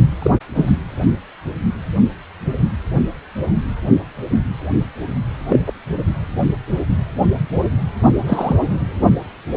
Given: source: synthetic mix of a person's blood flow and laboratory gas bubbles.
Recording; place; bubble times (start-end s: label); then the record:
Doppler ultrasound of blood flow; precordium
0.22-0.31 s: bubbles
0.54-0.70 s: bubbles
5.48-5.60 s: bubbles
5.67-5.72 s: bubbles
8.27-8.55 s: bubbles
From the record:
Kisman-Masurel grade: 123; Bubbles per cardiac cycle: 1 to 2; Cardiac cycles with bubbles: 10 to 50%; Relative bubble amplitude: loud (0.450 to 0.775); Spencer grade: 2 (many but less than half of the cardiac periods contain bubble signals, singularly or in groups); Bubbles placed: only in the low amplitude regions of the cardiac cycle